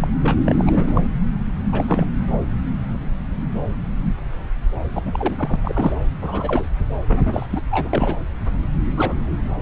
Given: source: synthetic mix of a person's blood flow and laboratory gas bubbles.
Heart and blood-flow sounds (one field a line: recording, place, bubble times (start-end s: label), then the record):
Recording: Doppler ultrasound of blood flow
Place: subclavian vein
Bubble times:
0.00-0.08 s: bubbles
0.22-0.37 s: bubbles
0.46-1.07 s: bubbles
1.72-2.06 s: bubbles
4.92-5.02 s: bubbles
5.05-5.56 s: bubbles
5.62-5.93 s: bubbles
6.22-6.71 s: bubbles
7.08-7.46 s: bubbles
7.50-7.61 s: bubbles
7.71-7.88 s: bubbles
7.93-8.18 s: bubbles
8.97-9.14 s: bubbles
From the record:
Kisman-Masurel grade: 222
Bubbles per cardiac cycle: several, 3 to 8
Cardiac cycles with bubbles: 10 to 50%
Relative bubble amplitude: moderate (0.250 to 0.450)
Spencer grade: 2 (many but less than half of the cardiac periods contain bubble signals, singularly or in groups)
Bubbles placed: anywhere in the cardiac cycle